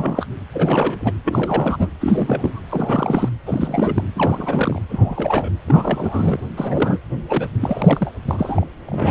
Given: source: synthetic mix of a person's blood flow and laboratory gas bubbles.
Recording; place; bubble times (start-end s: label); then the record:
Doppler ultrasound of blood flow; precordium
0.00-0.26 s: bubbles
0.53-1.12 s: bubbles
1.24-1.89 s: bubbles
2.00-2.60 s: bubbles
2.69-3.29 s: bubbles
3.46-4.04 s: bubbles
4.16-4.82 s: bubbles
4.88-5.50 s: bubbles
5.67-6.40 s: bubbles
6.57-7.00 s: bubbles
7.28-7.47 s: bubbles
7.60-8.11 s: bubbles
8.28-8.67 s: bubbles
8.87-9.11 s: bubbles
From the record:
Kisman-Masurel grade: 342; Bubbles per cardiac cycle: rolling drumbeat, 9 or more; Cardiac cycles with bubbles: 100%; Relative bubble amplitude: moderate (0.250 to 0.450); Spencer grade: 3 (all of the cardiac periods contain showers or single bubble signals, but not dominating or overriding the cardiac motion signals); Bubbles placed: anywhere in the cardiac cycle